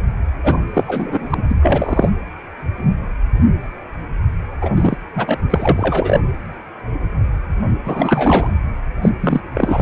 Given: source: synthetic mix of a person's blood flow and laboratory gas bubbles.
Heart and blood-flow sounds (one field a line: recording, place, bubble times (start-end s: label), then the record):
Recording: Doppler ultrasound of blood flow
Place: precordium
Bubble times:
0.43-0.60 s: bubbles
0.74-0.85 s: bubbles
0.88-1.34 s: bubbles
1.37-1.43 s: bubbles
1.49-1.55 s: bubbles
1.61-2.10 s: bubbles
4.61-4.97 s: bubbles
5.15-5.38 s: bubbles
5.50-6.20 s: bubbles
7.85-8.52 s: bubbles
9.02-9.09 s: bubbles
9.20-9.41 s: bubbles
9.54-9.82 s: bubbles
From the record:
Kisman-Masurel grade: 333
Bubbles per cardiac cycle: rolling drumbeat, 9 or more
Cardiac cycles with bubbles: 50 to 99%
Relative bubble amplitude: loud (0.450 to 0.775)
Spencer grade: 3 (all of the cardiac periods contain showers or single bubble signals, but not dominating or overriding the cardiac motion signals)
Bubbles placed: anywhere in the cardiac cycle